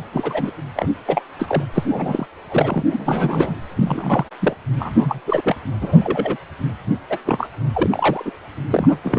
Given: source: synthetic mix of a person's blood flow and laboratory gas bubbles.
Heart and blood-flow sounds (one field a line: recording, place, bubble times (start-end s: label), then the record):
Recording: Doppler ultrasound of blood flow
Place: precordium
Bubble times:
0.12-0.51 s: bubbles
0.76-0.89 s: bubbles
1.06-1.22 s: bubbles
1.39-1.64 s: bubbles
1.74-1.84 s: bubbles
1.89-2.26 s: bubbles
2.49-2.83 s: bubbles
2.90-3.55 s: bubbles
3.75-4.25 s: bubbles
4.39-4.54 s: bubbles
4.79-5.21 s: bubbles
5.26-5.42 s: bubbles
5.44-5.55 s: bubbles
5.81-6.37 s: bubbles
7.09-7.18 s: bubbles
7.25-7.49 s: bubbles
7.73-8.31 s: bubbles
8.71-8.97 s: bubbles
9.04-9.19 s: bubbles
From the record:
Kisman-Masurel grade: 232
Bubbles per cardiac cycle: several, 3 to 8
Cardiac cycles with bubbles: 50 to 99%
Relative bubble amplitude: moderate (0.250 to 0.450)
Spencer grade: 3 (all of the cardiac periods contain showers or single bubble signals, but not dominating or overriding the cardiac motion signals)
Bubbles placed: anywhere in the cardiac cycle